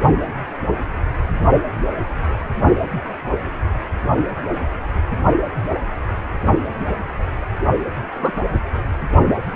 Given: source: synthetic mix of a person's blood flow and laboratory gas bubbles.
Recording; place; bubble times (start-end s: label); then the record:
Doppler ultrasound of blood flow; precordium
8.22-8.31 s: bubbles
From the record:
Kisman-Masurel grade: 123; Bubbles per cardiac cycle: 1 to 2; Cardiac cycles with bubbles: 10 to 50%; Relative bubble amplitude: loud (0.450 to 0.775); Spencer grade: 2 (many but less than half of the cardiac periods contain bubble signals, singularly or in groups); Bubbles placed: only in the low amplitude regions of the cardiac cycle